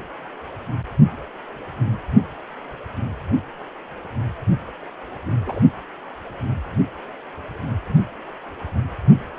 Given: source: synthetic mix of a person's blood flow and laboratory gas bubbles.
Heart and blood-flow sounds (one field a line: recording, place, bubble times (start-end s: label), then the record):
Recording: Doppler ultrasound of blood flow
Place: precordium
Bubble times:
5.46-5.60 s: bubbles
From the record:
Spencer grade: 2 (many but less than half of the cardiac periods contain bubble signals, singularly or in groups)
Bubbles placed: only in the low amplitude regions of the cardiac cycle